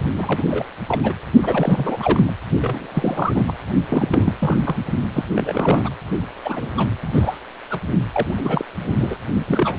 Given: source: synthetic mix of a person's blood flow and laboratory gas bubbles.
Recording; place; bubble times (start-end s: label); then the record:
Doppler ultrasound of blood flow; precordium
0.15-0.44 s: bubbles
0.50-0.65 s: bubbles
0.88-1.12 s: bubbles
1.43-2.32 s: bubbles
2.60-2.87 s: bubbles
2.94-3.54 s: bubbles
3.88-4.33 s: bubbles
4.39-4.59 s: bubbles
4.65-4.76 s: bubbles
5.13-5.25 s: bubbles
5.36-5.89 s: bubbles
6.44-6.69 s: bubbles
6.76-6.89 s: bubbles
7.01-7.40 s: bubbles
7.70-7.80 s: bubbles
8.10-8.65 s: bubbles
8.78-8.95 s: bubbles
8.99-9.16 s: bubbles
9.47-9.79 s: bubbles
From the record:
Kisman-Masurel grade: 342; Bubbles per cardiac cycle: rolling drumbeat, 9 or more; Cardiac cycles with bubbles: 100%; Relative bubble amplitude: moderate (0.250 to 0.450); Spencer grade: 3 (all of the cardiac periods contain showers or single bubble signals, but not dominating or overriding the cardiac motion signals); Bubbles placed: only in the low amplitude regions of the cardiac cycle